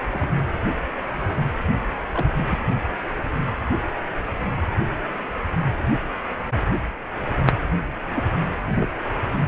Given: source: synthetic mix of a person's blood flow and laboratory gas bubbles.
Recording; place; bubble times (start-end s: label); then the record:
Doppler ultrasound of blood flow; precordium
0.11-0.28 s: bubbles
2.12-2.26 s: bubbles
2.36-2.59 s: bubbles
8.15-8.24 s: bubbles
8.74-8.89 s: bubbles
From the record:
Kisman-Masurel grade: 122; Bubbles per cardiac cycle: 1 to 2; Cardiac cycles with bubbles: 10 to 50%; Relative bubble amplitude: moderate (0.250 to 0.450); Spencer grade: 2 (many but less than half of the cardiac periods contain bubble signals, singularly or in groups); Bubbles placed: anywhere in the cardiac cycle